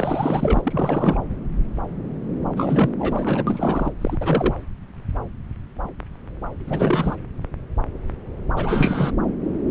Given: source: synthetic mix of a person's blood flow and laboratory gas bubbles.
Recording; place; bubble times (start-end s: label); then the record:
Doppler ultrasound of blood flow; subclavian vein
0.00-1.19 s: bubbles
2.57-2.90 s: bubbles
2.99-3.44 s: bubbles
3.47-3.91 s: bubbles
4.01-4.17 s: bubbles
4.21-4.55 s: bubbles
6.67-7.16 s: bubbles
8.56-9.11 s: bubbles
From the record:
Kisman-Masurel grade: 332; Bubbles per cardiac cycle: rolling drumbeat, 9 or more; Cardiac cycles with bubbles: 50 to 99%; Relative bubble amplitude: moderate (0.250 to 0.450); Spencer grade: 3 (all of the cardiac periods contain showers or single bubble signals, but not dominating or overriding the cardiac motion signals); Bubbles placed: anywhere in the cardiac cycle